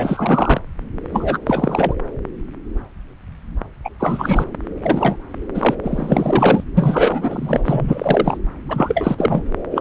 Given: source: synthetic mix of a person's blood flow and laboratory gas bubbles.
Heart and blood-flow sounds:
Doppler ultrasound of blood flow; subclavian vein
0.00-0.59 s: bubbles
1.11-1.39 s: bubbles
1.46-1.94 s: bubbles
3.84-3.90 s: bubbles
3.99-4.45 s: bubbles
4.82-5.27 s: bubbles
5.54-5.75 s: bubbles
5.83-6.63 s: bubbles
6.77-7.63 s: bubbles
7.66-8.38 s: bubbles
8.69-9.44 s: bubbles
9.71-9.81 s: bubbles
From the record:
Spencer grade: 3 (all of the cardiac periods contain showers or single bubble signals, but not dominating or overriding the cardiac motion signals); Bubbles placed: anywhere in the cardiac cycle

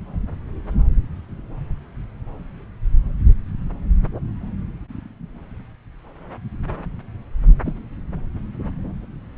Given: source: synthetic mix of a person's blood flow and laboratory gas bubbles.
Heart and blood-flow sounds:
Doppler ultrasound of blood flow; subclavian vein
7.66-7.75 s: bubbles
From the record:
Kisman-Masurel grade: 112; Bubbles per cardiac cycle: 1 to 2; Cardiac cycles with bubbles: 1 to 10%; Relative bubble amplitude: moderate (0.250 to 0.450); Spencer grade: 1 (occasional bubble signal discernible with the cardiac motion signal, with majority of cardiac periods free of bubbles); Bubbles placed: anywhere in the cardiac cycle

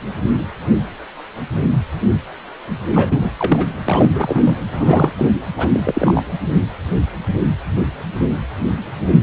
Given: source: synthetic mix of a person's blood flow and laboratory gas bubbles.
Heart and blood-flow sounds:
Doppler ultrasound of blood flow; precordium
2.92-3.31 s: bubbles
3.37-3.75 s: bubbles
3.86-4.57 s: bubbles
4.72-5.12 s: bubbles
5.16-5.30 s: bubbles
5.57-5.70 s: bubbles
5.74-5.80 s: bubbles
5.85-6.22 s: bubbles
From the record:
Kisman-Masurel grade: 332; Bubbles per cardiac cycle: rolling drumbeat, 9 or more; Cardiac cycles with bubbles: 50 to 99%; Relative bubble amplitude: moderate (0.250 to 0.450); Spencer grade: 3 (all of the cardiac periods contain showers or single bubble signals, but not dominating or overriding the cardiac motion signals); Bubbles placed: anywhere in the cardiac cycle

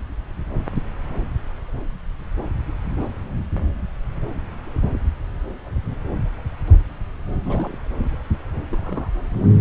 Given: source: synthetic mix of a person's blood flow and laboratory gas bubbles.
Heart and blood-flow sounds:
Doppler ultrasound of blood flow; subclavian vein
7.46-7.79 s: bubbles
8.69-9.10 s: bubbles
From the record:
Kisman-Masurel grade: 211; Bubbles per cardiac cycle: several, 3 to 8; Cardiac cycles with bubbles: 1 to 10%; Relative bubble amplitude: barely perceptible (0.100 to 0.250); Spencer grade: 1 (occasional bubble signal discernible with the cardiac motion signal, with majority of cardiac periods free of bubbles); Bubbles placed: anywhere in the cardiac cycle

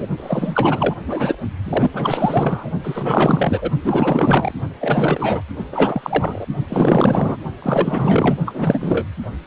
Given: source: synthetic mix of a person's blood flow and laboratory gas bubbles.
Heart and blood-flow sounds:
Doppler ultrasound of blood flow; precordium
0.00-0.07 s: bubbles
0.17-0.95 s: bubbles
1.05-1.35 s: bubbles
1.64-1.90 s: bubbles
1.93-2.70 s: bubbles
2.83-3.70 s: bubbles
3.84-4.52 s: bubbles
4.80-5.41 s: bubbles
5.71-6.46 s: bubbles
6.69-7.38 s: bubbles
7.62-8.38 s: bubbles
8.45-9.07 s: bubbles
From the record:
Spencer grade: 4 (maximum detectable bubble signal sounding continuously throughout systole and diastole of every cardiac period, and overriding the amplitude of the normal cardiac signals); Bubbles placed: only in the low amplitude regions of the cardiac cycle

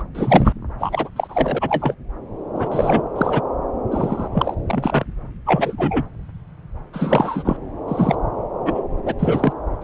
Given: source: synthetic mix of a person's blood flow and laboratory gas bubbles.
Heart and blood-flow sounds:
Doppler ultrasound of blood flow; subclavian vein
0.00-0.02 s: bubbles
0.14-0.53 s: bubbles
0.79-1.09 s: bubbles
1.16-1.95 s: bubbles
2.54-3.02 s: bubbles
3.15-3.42 s: bubbles
3.91-4.29 s: bubbles
4.33-4.55 s: bubbles
4.67-5.04 s: bubbles
5.46-6.06 s: bubbles
6.93-7.57 s: bubbles
7.88-8.16 s: bubbles
8.65-8.86 s: bubbles
9.05-9.14 s: bubbles
9.19-9.53 s: bubbles
9.81-9.84 s: bubbles
From the record:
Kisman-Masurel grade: 233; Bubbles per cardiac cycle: several, 3 to 8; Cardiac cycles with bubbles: 50 to 99%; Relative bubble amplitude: loud (0.450 to 0.775); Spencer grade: 3 (all of the cardiac periods contain showers or single bubble signals, but not dominating or overriding the cardiac motion signals); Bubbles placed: anywhere in the cardiac cycle

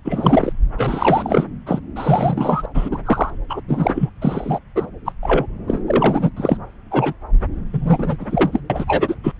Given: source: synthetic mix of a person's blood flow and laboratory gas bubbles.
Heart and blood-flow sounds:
Doppler ultrasound of blood flow; subclavian vein
0.05-0.53 s: bubbles
0.78-1.44 s: bubbles
1.66-1.79 s: bubbles
1.96-2.66 s: bubbles
2.74-2.98 s: bubbles
3.05-3.30 s: bubbles
3.49-3.60 s: bubbles
3.68-4.10 s: bubbles
4.22-4.59 s: bubbles
4.75-4.87 s: bubbles
5.05-5.12 s: bubbles
5.22-5.47 s: bubbles
5.67-5.82 s: bubbles
5.87-6.30 s: bubbles
6.37-6.58 s: bubbles
6.91-7.14 s: bubbles
7.72-8.17 s: bubbles
8.20-8.60 s: bubbles
8.70-9.15 s: bubbles
9.23-9.33 s: bubbles
From the record:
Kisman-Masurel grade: 243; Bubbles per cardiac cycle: several, 3 to 8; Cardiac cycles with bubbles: 100%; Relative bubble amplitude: loud (0.450 to 0.775); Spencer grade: 3 (all of the cardiac periods contain showers or single bubble signals, but not dominating or overriding the cardiac motion signals); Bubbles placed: anywhere in the cardiac cycle

